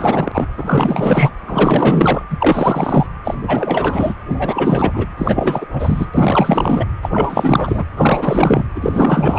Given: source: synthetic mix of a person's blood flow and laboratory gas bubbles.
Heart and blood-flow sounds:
Doppler ultrasound of blood flow; precordium
0.00-0.47 s: bubbles
0.57-1.30 s: bubbles
1.46-2.23 s: bubbles
2.30-3.06 s: bubbles
3.24-3.37 s: bubbles
3.42-4.14 s: bubbles
4.30-5.07 s: bubbles
5.18-5.67 s: bubbles
5.73-6.07 s: bubbles
6.14-6.85 s: bubbles
7.02-7.10 s: bubbles
7.13-7.86 s: bubbles
7.97-8.66 s: bubbles
8.75-9.39 s: bubbles
From the record:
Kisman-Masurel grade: 444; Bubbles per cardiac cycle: continuous sound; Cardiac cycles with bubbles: 100%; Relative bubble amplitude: maximal (0.775 to 0.999); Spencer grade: 4 (maximum detectable bubble signal sounding continuously throughout systole and diastole of every cardiac period, and overriding the amplitude of the normal cardiac signals); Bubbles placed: anywhere in the cardiac cycle

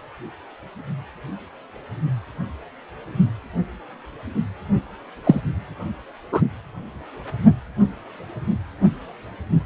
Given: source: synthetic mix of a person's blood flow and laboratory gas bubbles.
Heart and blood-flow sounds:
Doppler ultrasound of blood flow; precordium
5.24-5.41 s: bubbles
6.32-6.41 s: bubbles
From the record:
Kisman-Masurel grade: 113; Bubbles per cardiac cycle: 1 to 2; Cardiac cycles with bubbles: 1 to 10%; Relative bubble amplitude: loud (0.450 to 0.775); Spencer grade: 1 (occasional bubble signal discernible with the cardiac motion signal, with majority of cardiac periods free of bubbles); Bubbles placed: only in the low amplitude regions of the cardiac cycle

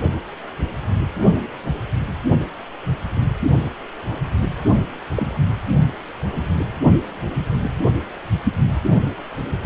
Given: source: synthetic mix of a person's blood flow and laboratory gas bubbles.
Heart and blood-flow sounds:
Doppler ultrasound of blood flow; precordium
5.15-5.38 s: bubbles
From the record:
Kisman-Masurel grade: 122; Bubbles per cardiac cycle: 1 to 2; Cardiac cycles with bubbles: 10 to 50%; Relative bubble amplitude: moderate (0.250 to 0.450); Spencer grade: 2 (many but less than half of the cardiac periods contain bubble signals, singularly or in groups); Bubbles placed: only in the low amplitude regions of the cardiac cycle

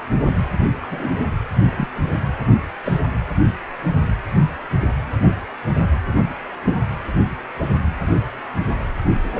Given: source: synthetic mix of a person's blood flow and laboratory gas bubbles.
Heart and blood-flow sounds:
Doppler ultrasound of blood flow; precordium
0.82-0.86 s: bubbles
0.90-1.11 s: bubbles
1.70-1.86 s: bubbles
2.84-2.99 s: bubbles
6.66-6.80 s: bubbles
From the record:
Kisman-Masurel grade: 122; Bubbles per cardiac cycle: 1 to 2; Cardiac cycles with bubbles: 10 to 50%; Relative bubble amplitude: moderate (0.250 to 0.450); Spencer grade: 2 (many but less than half of the cardiac periods contain bubble signals, singularly or in groups); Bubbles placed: only in the low amplitude regions of the cardiac cycle

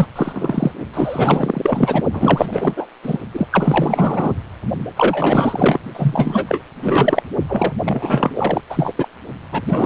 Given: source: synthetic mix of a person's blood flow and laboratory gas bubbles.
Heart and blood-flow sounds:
Doppler ultrasound of blood flow; precordium
0.00-0.07 s: bubbles
0.15-0.72 s: bubbles
0.93-2.02 s: bubbles
2.13-2.87 s: bubbles
3.03-3.18 s: bubbles
3.34-3.48 s: bubbles
3.52-4.34 s: bubbles
4.96-5.79 s: bubbles
5.94-6.62 s: bubbles
6.81-7.23 s: bubbles
7.48-7.73 s: bubbles
7.84-8.61 s: bubbles
8.69-8.93 s: bubbles
8.96-9.08 s: bubbles
9.51-9.61 s: bubbles
9.67-9.86 s: bubbles
From the record:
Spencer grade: 4 (maximum detectable bubble signal sounding continuously throughout systole and diastole of every cardiac period, and overriding the amplitude of the normal cardiac signals); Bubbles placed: only in the low amplitude regions of the cardiac cycle

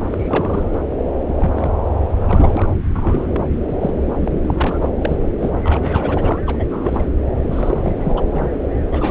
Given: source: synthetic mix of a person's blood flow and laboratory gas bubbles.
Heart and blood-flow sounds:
Doppler ultrasound of blood flow; subclavian vein
0.03-0.70 s: bubbles
0.73-0.78 s: bubbles
1.27-1.34 s: bubbles
1.37-1.72 s: bubbles
2.27-2.72 s: bubbles
2.96-3.29 s: bubbles
3.32-3.40 s: bubbles
3.67-3.99 s: bubbles
4.07-4.12 s: bubbles
4.20-4.41 s: bubbles
4.45-4.88 s: bubbles
5.01-5.17 s: bubbles
5.40-5.50 s: bubbles
5.64-6.42 s: bubbles
6.46-6.65 s: bubbles
6.70-7.09 s: bubbles
7.50-8.22 s: bubbles
8.32-8.46 s: bubbles
8.91-9.11 s: bubbles
From the record:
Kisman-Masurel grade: 342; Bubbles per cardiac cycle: rolling drumbeat, 9 or more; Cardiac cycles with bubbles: 100%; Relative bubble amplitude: moderate (0.250 to 0.450); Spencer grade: 3 (all of the cardiac periods contain showers or single bubble signals, but not dominating or overriding the cardiac motion signals); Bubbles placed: anywhere in the cardiac cycle

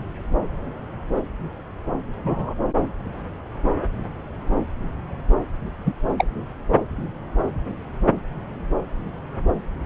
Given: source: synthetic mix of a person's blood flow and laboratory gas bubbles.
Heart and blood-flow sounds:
Doppler ultrasound of blood flow; subclavian vein
2.24-2.54 s: bubbles
5.85-5.94 s: bubbles
6.18-6.25 s: bubbles
From the record:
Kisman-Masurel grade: 112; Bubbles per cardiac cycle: 1 to 2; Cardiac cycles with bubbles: 1 to 10%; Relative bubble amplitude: moderate (0.250 to 0.450); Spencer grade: 1 (occasional bubble signal discernible with the cardiac motion signal, with majority of cardiac periods free of bubbles); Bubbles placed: anywhere in the cardiac cycle

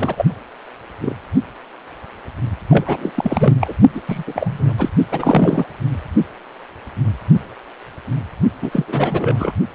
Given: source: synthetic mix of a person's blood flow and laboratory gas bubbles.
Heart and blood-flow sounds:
Doppler ultrasound of blood flow; precordium
0.00-0.26 s: bubbles
1.01-1.15 s: bubbles
2.70-3.10 s: bubbles
3.15-3.55 s: bubbles
3.60-3.74 s: bubbles
3.94-4.01 s: bubbles
4.08-4.23 s: bubbles
4.27-4.74 s: bubbles
4.78-4.89 s: bubbles
5.12-5.65 s: bubbles
8.62-9.52 s: bubbles
From the record:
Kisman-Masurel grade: 332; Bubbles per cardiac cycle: rolling drumbeat, 9 or more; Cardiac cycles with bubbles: 50 to 99%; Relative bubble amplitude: moderate (0.250 to 0.450); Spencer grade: 3 (all of the cardiac periods contain showers or single bubble signals, but not dominating or overriding the cardiac motion signals); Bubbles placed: only in the low amplitude regions of the cardiac cycle

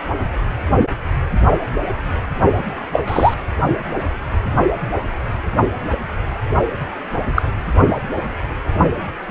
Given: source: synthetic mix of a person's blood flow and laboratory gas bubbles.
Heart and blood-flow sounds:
Doppler ultrasound of blood flow; precordium
2.93-3.01 s: bubbles
3.07-3.34 s: bubbles
7.34-7.42 s: bubbles
From the record:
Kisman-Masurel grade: 123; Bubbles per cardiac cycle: 1 to 2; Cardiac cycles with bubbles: 10 to 50%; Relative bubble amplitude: loud (0.450 to 0.775); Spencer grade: 2 (many but less than half of the cardiac periods contain bubble signals, singularly or in groups); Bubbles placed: only in the low amplitude regions of the cardiac cycle

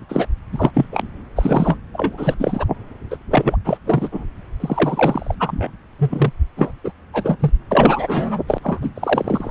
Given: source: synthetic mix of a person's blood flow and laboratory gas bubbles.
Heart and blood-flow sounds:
Doppler ultrasound of blood flow; subclavian vein
0.00-0.05 s: bubbles
0.08-0.27 s: bubbles
0.52-0.70 s: bubbles
0.73-0.85 s: bubbles
0.91-1.08 s: bubbles
1.35-1.76 s: bubbles
1.93-2.34 s: bubbles
2.39-2.66 s: bubbles
3.10-3.17 s: bubbles
3.30-3.56 s: bubbles
3.65-3.79 s: bubbles
3.85-4.09 s: bubbles
4.12-4.24 s: bubbles
4.60-5.34 s: bubbles
5.39-5.71 s: bubbles
5.98-6.31 s: bubbles
6.57-6.72 s: bubbles
6.84-6.92 s: bubbles
7.12-7.35 s: bubbles
7.39-7.51 s: bubbles
7.71-8.42 s: bubbles
8.47-8.58 s: bubbles
8.63-8.79 s: bubbles
8.81-8.90 s: bubbles
8.95-9.51 s: bubbles
From the record:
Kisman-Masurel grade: 343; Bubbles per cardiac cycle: rolling drumbeat, 9 or more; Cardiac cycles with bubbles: 100%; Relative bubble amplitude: loud (0.450 to 0.775); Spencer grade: 3 (all of the cardiac periods contain showers or single bubble signals, but not dominating or overriding the cardiac motion signals); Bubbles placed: anywhere in the cardiac cycle

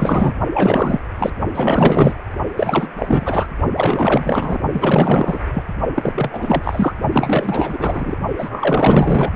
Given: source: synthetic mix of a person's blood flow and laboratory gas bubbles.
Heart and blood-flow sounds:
Doppler ultrasound of blood flow; precordium
0.00-0.34 s: bubbles
0.53-1.00 s: bubbles
1.19-1.33 s: bubbles
1.54-2.14 s: bubbles
2.56-2.88 s: bubbles
2.99-3.46 s: bubbles
3.75-4.59 s: bubbles
4.73-5.39 s: bubbles
5.54-5.63 s: bubbles
5.95-6.93 s: bubbles
7.12-8.16 s: bubbles
8.38-9.31 s: bubbles
From the record:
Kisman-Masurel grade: 444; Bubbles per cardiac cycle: continuous sound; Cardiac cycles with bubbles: 100%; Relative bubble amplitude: maximal (0.775 to 0.999); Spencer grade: 4 (maximum detectable bubble signal sounding continuously throughout systole and diastole of every cardiac period, and overriding the amplitude of the normal cardiac signals); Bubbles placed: only in the low amplitude regions of the cardiac cycle

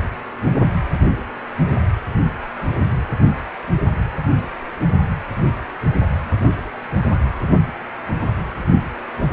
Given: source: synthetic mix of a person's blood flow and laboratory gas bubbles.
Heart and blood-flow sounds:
Doppler ultrasound of blood flow; precordium
1.66-1.74 s: bubbles
From the record:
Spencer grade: 2 (many but less than half of the cardiac periods contain bubble signals, singularly or in groups); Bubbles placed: anywhere in the cardiac cycle

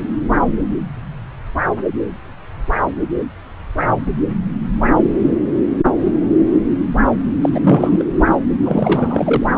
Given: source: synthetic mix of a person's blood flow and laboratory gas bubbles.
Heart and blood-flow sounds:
Doppler ultrasound of blood flow; subclavian vein
7.42-7.49 s: bubbles
7.53-8.03 s: bubbles
8.18-8.33 s: bubbles
8.63-9.46 s: bubbles
From the record:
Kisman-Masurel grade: 223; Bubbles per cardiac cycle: several, 3 to 8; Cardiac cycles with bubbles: 10 to 50%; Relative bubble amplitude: loud (0.450 to 0.775); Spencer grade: 2 (many but less than half of the cardiac periods contain bubble signals, singularly or in groups); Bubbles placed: anywhere in the cardiac cycle

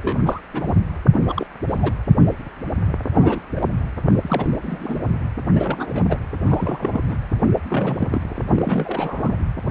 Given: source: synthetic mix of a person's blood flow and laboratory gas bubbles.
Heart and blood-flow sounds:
Doppler ultrasound of blood flow; precordium
0.02-0.17 s: bubbles
0.21-0.41 s: bubbles
0.53-0.74 s: bubbles
1.13-1.46 s: bubbles
1.68-1.92 s: bubbles
3.14-3.40 s: bubbles
3.55-3.67 s: bubbles
4.23-4.54 s: bubbles
4.62-4.99 s: bubbles
5.54-6.06 s: bubbles
6.08-6.17 s: bubbles
6.45-7.02 s: bubbles
7.09-7.17 s: bubbles
7.54-7.61 s: bubbles
7.68-8.43 s: bubbles
8.54-9.36 s: bubbles
From the record:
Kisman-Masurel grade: 232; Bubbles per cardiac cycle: several, 3 to 8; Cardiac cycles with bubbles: 50 to 99%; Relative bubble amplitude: moderate (0.250 to 0.450); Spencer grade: 3 (all of the cardiac periods contain showers or single bubble signals, but not dominating or overriding the cardiac motion signals); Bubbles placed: anywhere in the cardiac cycle

